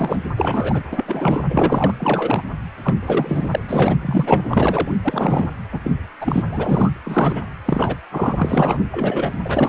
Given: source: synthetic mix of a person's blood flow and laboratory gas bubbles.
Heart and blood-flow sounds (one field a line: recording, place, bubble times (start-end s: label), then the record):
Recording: Doppler ultrasound of blood flow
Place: precordium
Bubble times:
0.00-0.20 s: bubbles
0.37-0.81 s: bubbles
0.91-1.44 s: bubbles
1.50-1.95 s: bubbles
2.00-2.42 s: bubbles
2.82-2.94 s: bubbles
3.00-3.59 s: bubbles
3.69-3.96 s: bubbles
4.01-4.42 s: bubbles
4.50-4.92 s: bubbles
5.04-5.50 s: bubbles
5.71-5.79 s: bubbles
5.84-5.91 s: bubbles
6.21-6.42 s: bubbles
6.51-6.92 s: bubbles
7.05-7.42 s: bubbles
7.65-7.96 s: bubbles
8.12-8.79 s: bubbles
8.91-9.37 s: bubbles
9.45-9.69 s: bubbles
From the record:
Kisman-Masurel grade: 343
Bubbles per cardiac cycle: rolling drumbeat, 9 or more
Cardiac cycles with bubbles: 100%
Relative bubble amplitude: loud (0.450 to 0.775)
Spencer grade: 3 (all of the cardiac periods contain showers or single bubble signals, but not dominating or overriding the cardiac motion signals)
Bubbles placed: anywhere in the cardiac cycle